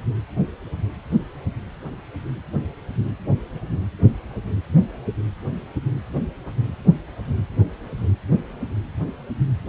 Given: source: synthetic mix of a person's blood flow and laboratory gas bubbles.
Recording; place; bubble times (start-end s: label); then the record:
Doppler ultrasound of blood flow; precordium
no bubbles
From the record:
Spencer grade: 0 (complete lack of bubble signals)